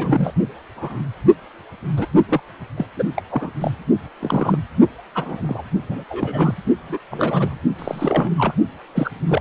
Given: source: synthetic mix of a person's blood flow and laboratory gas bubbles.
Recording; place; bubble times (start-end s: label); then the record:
Doppler ultrasound of blood flow; precordium
0.00-0.33 s: bubbles
0.76-1.02 s: bubbles
1.96-2.07 s: bubbles
2.29-2.41 s: bubbles
2.76-2.86 s: bubbles
2.96-3.04 s: bubbles
3.16-3.21 s: bubbles
3.30-3.52 s: bubbles
3.60-3.71 s: bubbles
4.20-4.58 s: bubbles
5.14-5.62 s: bubbles
5.88-6.04 s: bubbles
6.09-6.54 s: bubbles
6.89-6.98 s: bubbles
7.10-7.58 s: bubbles
7.78-8.30 s: bubbles
8.38-8.54 s: bubbles
8.95-9.11 s: bubbles
9.28-9.41 s: bubbles
From the record:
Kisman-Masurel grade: 242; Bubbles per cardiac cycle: several, 3 to 8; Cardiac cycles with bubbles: 100%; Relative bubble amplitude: moderate (0.250 to 0.450); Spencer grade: 3 (all of the cardiac periods contain showers or single bubble signals, but not dominating or overriding the cardiac motion signals); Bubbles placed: only in the low amplitude regions of the cardiac cycle